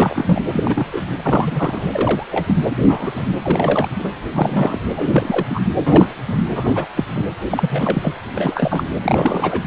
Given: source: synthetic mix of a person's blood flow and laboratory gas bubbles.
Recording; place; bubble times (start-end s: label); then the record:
Doppler ultrasound of blood flow; precordium
0.00-0.41 s: bubbles
0.47-0.87 s: bubbles
0.93-1.01 s: bubbles
1.16-1.88 s: bubbles
1.93-2.25 s: bubbles
2.31-2.56 s: bubbles
2.64-2.69 s: bubbles
2.86-3.23 s: bubbles
3.42-3.89 s: bubbles
3.99-4.10 s: bubbles
4.33-4.78 s: bubbles
4.96-5.46 s: bubbles
5.49-5.60 s: bubbles
5.87-6.16 s: bubbles
6.28-6.48 s: bubbles
6.55-6.87 s: bubbles
6.96-7.06 s: bubbles
7.15-7.25 s: bubbles
7.50-8.14 s: bubbles
8.33-8.94 s: bubbles
9.02-9.62 s: bubbles
From the record:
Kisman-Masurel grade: 242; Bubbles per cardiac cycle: several, 3 to 8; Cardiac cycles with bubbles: 100%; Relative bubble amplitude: moderate (0.250 to 0.450); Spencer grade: 3 (all of the cardiac periods contain showers or single bubble signals, but not dominating or overriding the cardiac motion signals); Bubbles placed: anywhere in the cardiac cycle